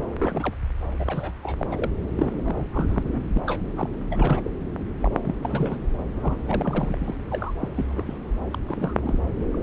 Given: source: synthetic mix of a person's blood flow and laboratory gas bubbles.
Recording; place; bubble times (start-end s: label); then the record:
Doppler ultrasound of blood flow; subclavian vein
0.20-0.55 s: bubbles
0.99-1.32 s: bubbles
1.43-1.66 s: bubbles
1.71-1.90 s: bubbles
2.16-2.67 s: bubbles
2.72-3.29 s: bubbles
3.35-3.43 s: bubbles
3.46-3.62 s: bubbles
3.76-3.89 s: bubbles
4.10-4.51 s: bubbles
5.00-5.11 s: bubbles
5.21-5.35 s: bubbles
5.42-5.78 s: bubbles
6.13-6.37 s: bubbles
6.46-7.15 s: bubbles
7.30-7.54 s: bubbles
7.60-7.69 s: bubbles
7.71-8.18 s: bubbles
8.51-8.59 s: bubbles
8.68-8.94 s: bubbles
9.03-9.19 s: bubbles
9.51-9.63 s: bubbles
From the record:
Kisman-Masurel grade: 342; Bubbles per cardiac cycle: rolling drumbeat, 9 or more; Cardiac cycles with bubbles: 100%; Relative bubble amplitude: moderate (0.250 to 0.450); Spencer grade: 3 (all of the cardiac periods contain showers or single bubble signals, but not dominating or overriding the cardiac motion signals); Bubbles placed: anywhere in the cardiac cycle